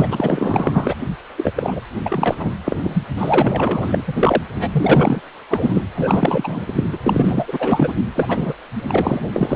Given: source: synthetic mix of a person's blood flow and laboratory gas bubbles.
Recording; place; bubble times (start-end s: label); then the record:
Doppler ultrasound of blood flow; precordium
0.00-0.95 s: bubbles
1.36-1.52 s: bubbles
1.56-1.80 s: bubbles
2.05-2.52 s: bubbles
2.65-2.79 s: bubbles
2.83-3.02 s: bubbles
3.17-4.03 s: bubbles
4.07-4.42 s: bubbles
4.54-4.69 s: bubbles
4.71-5.21 s: bubbles
5.49-5.83 s: bubbles
5.95-6.99 s: bubbles
7.04-7.94 s: bubbles
8.12-8.54 s: bubbles
8.74-9.21 s: bubbles
9.32-9.56 s: bubbles
From the record:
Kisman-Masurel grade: 444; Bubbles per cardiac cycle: continuous sound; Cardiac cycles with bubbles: 100%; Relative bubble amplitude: maximal (0.775 to 0.999); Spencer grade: 4 (maximum detectable bubble signal sounding continuously throughout systole and diastole of every cardiac period, and overriding the amplitude of the normal cardiac signals); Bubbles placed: anywhere in the cardiac cycle